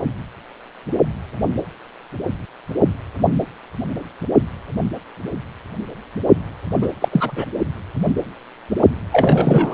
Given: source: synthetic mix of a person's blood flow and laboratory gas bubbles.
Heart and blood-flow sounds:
Doppler ultrasound of blood flow; precordium
6.81-6.88 s: bubbles
7.00-7.08 s: bubbles
7.12-7.44 s: bubbles
9.12-9.74 s: bubbles
From the record:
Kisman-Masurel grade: 223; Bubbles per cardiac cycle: several, 3 to 8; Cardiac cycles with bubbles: 10 to 50%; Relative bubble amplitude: loud (0.450 to 0.775); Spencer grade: 2 (many but less than half of the cardiac periods contain bubble signals, singularly or in groups); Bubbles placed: anywhere in the cardiac cycle

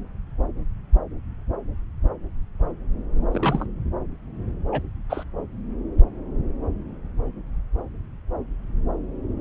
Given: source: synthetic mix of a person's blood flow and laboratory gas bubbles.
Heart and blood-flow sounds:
Doppler ultrasound of blood flow; subclavian vein
3.31-3.66 s: bubbles
4.72-4.81 s: bubbles
5.09-5.23 s: bubbles
From the record:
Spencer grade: 1 (occasional bubble signal discernible with the cardiac motion signal, with majority of cardiac periods free of bubbles); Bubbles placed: anywhere in the cardiac cycle

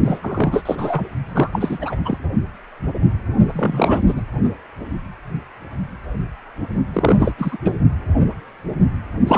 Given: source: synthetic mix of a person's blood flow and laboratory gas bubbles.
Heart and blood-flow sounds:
Doppler ultrasound of blood flow; precordium
0.05-0.18 s: bubbles
0.22-1.04 s: bubbles
1.26-1.78 s: bubbles
1.81-1.96 s: bubbles
2.04-2.18 s: bubbles
3.46-4.03 s: bubbles
4.07-4.21 s: bubbles
6.92-7.34 s: bubbles
7.38-7.57 s: bubbles
7.64-7.74 s: bubbles
9.27-9.38 s: bubbles
From the record:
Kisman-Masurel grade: 333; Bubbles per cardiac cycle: rolling drumbeat, 9 or more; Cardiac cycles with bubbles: 50 to 99%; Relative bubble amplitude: loud (0.450 to 0.775); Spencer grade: 3 (all of the cardiac periods contain showers or single bubble signals, but not dominating or overriding the cardiac motion signals); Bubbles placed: only in the low amplitude regions of the cardiac cycle

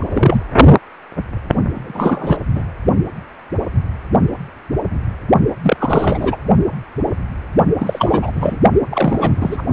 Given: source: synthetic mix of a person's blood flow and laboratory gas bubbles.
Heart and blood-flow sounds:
Doppler ultrasound of blood flow; precordium
0.00-0.42 s: bubbles
1.74-2.38 s: bubbles
2.55-2.62 s: bubbles
5.63-6.38 s: bubbles
7.79-8.31 s: bubbles
8.33-8.56 s: bubbles
8.89-9.63 s: bubbles
From the record:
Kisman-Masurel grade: 333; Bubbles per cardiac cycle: rolling drumbeat, 9 or more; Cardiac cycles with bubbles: 50 to 99%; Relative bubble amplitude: loud (0.450 to 0.775); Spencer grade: 3 (all of the cardiac periods contain showers or single bubble signals, but not dominating or overriding the cardiac motion signals); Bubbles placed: only in the low amplitude regions of the cardiac cycle

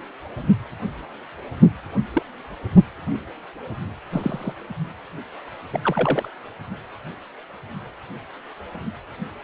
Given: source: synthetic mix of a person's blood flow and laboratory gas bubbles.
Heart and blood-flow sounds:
Doppler ultrasound of blood flow; precordium
2.13-2.23 s: bubbles
4.12-4.54 s: bubbles
5.72-6.29 s: bubbles
From the record:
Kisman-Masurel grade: 122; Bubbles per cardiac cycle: 1 to 2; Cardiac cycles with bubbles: 10 to 50%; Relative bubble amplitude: moderate (0.250 to 0.450); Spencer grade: 2 (many but less than half of the cardiac periods contain bubble signals, singularly or in groups); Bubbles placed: anywhere in the cardiac cycle

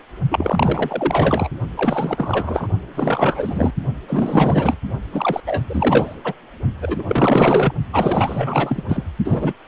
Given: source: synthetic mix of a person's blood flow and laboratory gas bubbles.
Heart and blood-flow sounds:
Doppler ultrasound of blood flow; precordium
0.30-1.50 s: bubbles
1.74-2.67 s: bubbles
2.94-3.73 s: bubbles
4.07-4.76 s: bubbles
5.12-5.41 s: bubbles
5.46-5.64 s: bubbles
5.69-6.15 s: bubbles
6.24-6.33 s: bubbles
6.82-7.73 s: bubbles
7.92-8.83 s: bubbles
8.88-9.04 s: bubbles
9.24-9.53 s: bubbles
From the record:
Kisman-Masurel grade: 444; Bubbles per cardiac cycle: continuous sound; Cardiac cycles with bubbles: 100%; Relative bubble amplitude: maximal (0.775 to 0.999); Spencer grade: 4 (maximum detectable bubble signal sounding continuously throughout systole and diastole of every cardiac period, and overriding the amplitude of the normal cardiac signals); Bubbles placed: only in the low amplitude regions of the cardiac cycle

